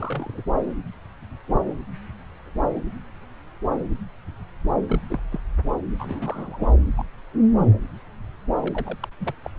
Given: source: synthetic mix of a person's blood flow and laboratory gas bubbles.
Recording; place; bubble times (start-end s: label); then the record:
Doppler ultrasound of blood flow; subclavian vein
0.00-0.42 s: bubbles
4.86-5.01 s: bubbles
5.08-5.19 s: bubbles
5.30-5.40 s: bubbles
5.98-6.75 s: bubbles
6.97-7.03 s: bubbles
8.62-8.98 s: bubbles
9.02-9.08 s: bubbles
9.20-9.33 s: bubbles
9.44-9.51 s: bubbles
From the record:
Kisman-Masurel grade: 221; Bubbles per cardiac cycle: several, 3 to 8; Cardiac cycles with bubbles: 10 to 50%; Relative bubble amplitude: barely perceptible (0.100 to 0.250); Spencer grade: 2 (many but less than half of the cardiac periods contain bubble signals, singularly or in groups); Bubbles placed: anywhere in the cardiac cycle